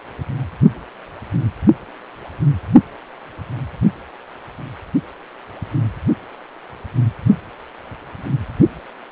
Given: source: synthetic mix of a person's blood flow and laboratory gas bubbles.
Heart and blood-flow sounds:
Doppler ultrasound of blood flow; precordium
no bubbles
From the record:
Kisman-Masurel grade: 000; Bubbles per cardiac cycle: 0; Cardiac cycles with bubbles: 0%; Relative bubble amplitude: no bubbles discernible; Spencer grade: 0 (complete lack of bubble signals)

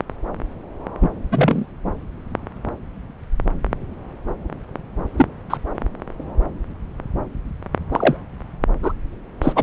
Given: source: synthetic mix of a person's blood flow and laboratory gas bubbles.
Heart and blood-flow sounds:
Doppler ultrasound of blood flow; subclavian vein
1.01-1.10 s: bubbles
1.31-1.66 s: bubbles
5.17-5.26 s: bubbles
5.50-5.58 s: bubbles
7.92-8.17 s: bubbles
8.82-8.93 s: bubbles
9.42-9.53 s: bubbles
9.55-9.63 s: bubbles
From the record:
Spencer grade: 2 (many but less than half of the cardiac periods contain bubble signals, singularly or in groups); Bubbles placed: anywhere in the cardiac cycle

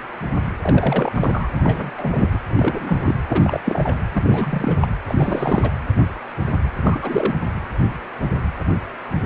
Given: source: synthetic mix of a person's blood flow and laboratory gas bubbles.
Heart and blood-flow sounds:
Doppler ultrasound of blood flow; precordium
0.61-1.50 s: bubbles
1.55-1.91 s: bubbles
1.97-2.39 s: bubbles
2.47-3.21 s: bubbles
3.27-3.61 s: bubbles
3.64-3.96 s: bubbles
4.12-4.75 s: bubbles
4.81-4.88 s: bubbles
5.06-5.71 s: bubbles
6.83-7.37 s: bubbles
From the record:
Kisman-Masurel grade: 332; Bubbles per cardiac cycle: rolling drumbeat, 9 or more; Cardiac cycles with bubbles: 50 to 99%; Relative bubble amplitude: moderate (0.250 to 0.450); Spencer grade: 3 (all of the cardiac periods contain showers or single bubble signals, but not dominating or overriding the cardiac motion signals); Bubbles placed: anywhere in the cardiac cycle

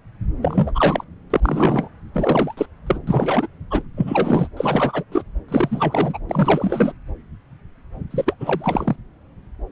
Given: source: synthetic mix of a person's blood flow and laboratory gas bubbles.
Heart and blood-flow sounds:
Doppler ultrasound of blood flow; subclavian vein
0.42-0.72 s: bubbles
0.74-1.04 s: bubbles
1.30-1.88 s: bubbles
2.13-2.54 s: bubbles
2.57-2.66 s: bubbles
2.86-2.99 s: bubbles
3.07-3.48 s: bubbles
3.71-3.81 s: bubbles
3.96-4.47 s: bubbles
4.56-5.04 s: bubbles
5.12-5.22 s: bubbles
5.48-6.18 s: bubbles
6.29-6.93 s: bubbles
8.11-8.35 s: bubbles
8.40-8.96 s: bubbles
From the record:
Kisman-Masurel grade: 333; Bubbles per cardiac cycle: rolling drumbeat, 9 or more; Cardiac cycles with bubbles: 50 to 99%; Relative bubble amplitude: loud (0.450 to 0.775); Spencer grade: 3 (all of the cardiac periods contain showers or single bubble signals, but not dominating or overriding the cardiac motion signals); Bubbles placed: anywhere in the cardiac cycle

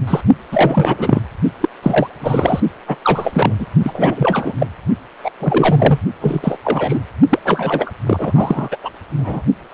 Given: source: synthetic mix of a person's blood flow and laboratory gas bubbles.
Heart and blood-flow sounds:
Doppler ultrasound of blood flow; precordium
0.07-0.21 s: bubbles
0.52-1.22 s: bubbles
1.60-1.69 s: bubbles
1.82-2.08 s: bubbles
2.21-2.60 s: bubbles
2.88-2.97 s: bubbles
3.02-3.53 s: bubbles
3.59-3.67 s: bubbles
3.83-4.54 s: bubbles
4.59-4.67 s: bubbles
5.23-5.31 s: bubbles
5.39-6.00 s: bubbles
6.21-6.57 s: bubbles
6.64-7.00 s: bubbles
7.30-7.39 s: bubbles
7.45-7.91 s: bubbles
8.06-8.77 s: bubbles
8.83-8.90 s: bubbles
9.18-9.43 s: bubbles
From the record:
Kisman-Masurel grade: 343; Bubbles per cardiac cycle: rolling drumbeat, 9 or more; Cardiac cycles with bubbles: 100%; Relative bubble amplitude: loud (0.450 to 0.775); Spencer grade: 3 (all of the cardiac periods contain showers or single bubble signals, but not dominating or overriding the cardiac motion signals); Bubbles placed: only in the low amplitude regions of the cardiac cycle

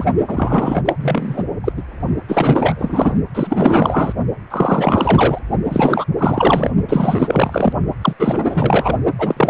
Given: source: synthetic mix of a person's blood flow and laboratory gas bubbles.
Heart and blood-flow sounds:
Doppler ultrasound of blood flow; precordium
0.00-0.05 s: bubbles
0.27-0.81 s: bubbles
0.85-0.93 s: bubbles
1.01-1.43 s: bubbles
1.64-1.73 s: bubbles
1.77-1.82 s: bubbles
2.28-3.14 s: bubbles
3.34-4.13 s: bubbles
4.50-5.39 s: bubbles
5.64-6.05 s: bubbles
6.17-6.71 s: bubbles
6.88-7.73 s: bubbles
8.01-8.13 s: bubbles
8.19-8.96 s: bubbles
9.18-9.50 s: bubbles
From the record:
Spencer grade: 4 (maximum detectable bubble signal sounding continuously throughout systole and diastole of every cardiac period, and overriding the amplitude of the normal cardiac signals); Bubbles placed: only in the low amplitude regions of the cardiac cycle

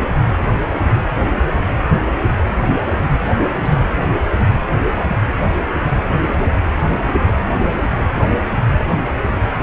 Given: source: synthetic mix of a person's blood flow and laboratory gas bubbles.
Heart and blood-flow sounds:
Doppler ultrasound of blood flow; precordium
3.23-3.51 s: bubbles
3.54-3.85 s: bubbles
From the record:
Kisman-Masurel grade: 211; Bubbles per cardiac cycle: several, 3 to 8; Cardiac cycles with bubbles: 1 to 10%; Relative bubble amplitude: barely perceptible (0.100 to 0.250); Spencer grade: 1 (occasional bubble signal discernible with the cardiac motion signal, with majority of cardiac periods free of bubbles); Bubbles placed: anywhere in the cardiac cycle

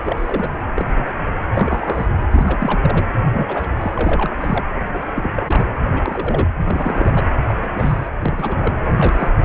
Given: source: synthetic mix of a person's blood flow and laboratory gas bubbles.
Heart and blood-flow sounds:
Doppler ultrasound of blood flow; precordium
0.02-0.57 s: bubbles
0.76-1.12 s: bubbles
1.54-2.06 s: bubbles
2.31-3.05 s: bubbles
3.33-3.69 s: bubbles
3.81-3.91 s: bubbles
3.94-4.30 s: bubbles
4.40-4.64 s: bubbles
4.93-5.05 s: bubbles
5.15-5.30 s: bubbles
5.33-5.67 s: bubbles
5.84-6.02 s: bubbles
6.05-6.49 s: bubbles
6.64-7.24 s: bubbles
7.47-7.54 s: bubbles
7.62-7.67 s: bubbles
7.74-8.09 s: bubbles
8.22-8.72 s: bubbles
8.87-9.31 s: bubbles
From the record:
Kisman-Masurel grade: 242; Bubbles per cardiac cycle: several, 3 to 8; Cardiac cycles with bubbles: 100%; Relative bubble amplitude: moderate (0.250 to 0.450); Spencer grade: 3 (all of the cardiac periods contain showers or single bubble signals, but not dominating or overriding the cardiac motion signals); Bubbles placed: anywhere in the cardiac cycle

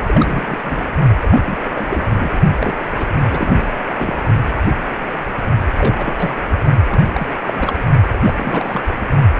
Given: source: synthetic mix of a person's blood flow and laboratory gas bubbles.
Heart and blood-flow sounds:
Doppler ultrasound of blood flow; precordium
0.07-0.93 s: bubbles
1.21-1.29 s: bubbles
1.31-1.57 s: bubbles
1.65-2.40 s: bubbles
2.60-2.75 s: bubbles
2.98-3.07 s: bubbles
3.23-3.65 s: bubbles
3.86-4.18 s: bubbles
5.72-6.15 s: bubbles
6.18-6.35 s: bubbles
6.88-7.06 s: bubbles
7.13-7.27 s: bubbles
7.46-7.73 s: bubbles
7.78-7.84 s: bubbles
8.25-8.80 s: bubbles
From the record:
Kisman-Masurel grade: 332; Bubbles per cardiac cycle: rolling drumbeat, 9 or more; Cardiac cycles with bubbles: 50 to 99%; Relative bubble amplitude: moderate (0.250 to 0.450); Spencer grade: 3 (all of the cardiac periods contain showers or single bubble signals, but not dominating or overriding the cardiac motion signals); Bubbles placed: only in the low amplitude regions of the cardiac cycle

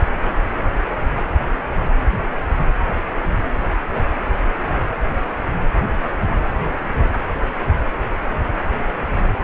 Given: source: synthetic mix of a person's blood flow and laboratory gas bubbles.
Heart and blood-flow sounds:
Doppler ultrasound of blood flow; precordium
no bubbles
From the record:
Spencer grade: 0 (complete lack of bubble signals)

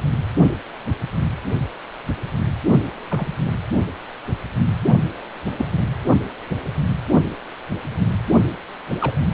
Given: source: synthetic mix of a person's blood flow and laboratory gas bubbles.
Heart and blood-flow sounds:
Doppler ultrasound of blood flow; precordium
3.10-3.28 s: bubbles
4.89-4.95 s: bubbles
5.57-5.65 s: bubbles
9.00-9.17 s: bubbles
From the record:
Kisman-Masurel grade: 122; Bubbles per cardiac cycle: 1 to 2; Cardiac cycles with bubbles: 10 to 50%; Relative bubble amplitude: moderate (0.250 to 0.450); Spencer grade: 2 (many but less than half of the cardiac periods contain bubble signals, singularly or in groups); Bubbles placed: anywhere in the cardiac cycle

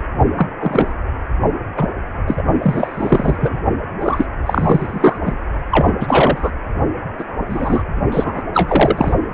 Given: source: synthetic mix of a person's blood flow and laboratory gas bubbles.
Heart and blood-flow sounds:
Doppler ultrasound of blood flow; precordium
0.00-0.02 s: bubbles
0.37-0.48 s: bubbles
0.60-0.93 s: bubbles
1.77-1.88 s: bubbles
2.27-2.42 s: bubbles
2.62-3.60 s: bubbles
4.01-4.26 s: bubbles
4.46-5.19 s: bubbles
5.25-5.33 s: bubbles
5.71-5.91 s: bubbles
6.00-6.51 s: bubbles
7.18-7.24 s: bubbles
7.49-7.84 s: bubbles
8.12-8.41 s: bubbles
8.54-9.13 s: bubbles
From the record:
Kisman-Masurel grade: 243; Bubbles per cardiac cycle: several, 3 to 8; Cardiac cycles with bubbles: 100%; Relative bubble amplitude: loud (0.450 to 0.775); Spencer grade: 3 (all of the cardiac periods contain showers or single bubble signals, but not dominating or overriding the cardiac motion signals); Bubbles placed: only in the low amplitude regions of the cardiac cycle

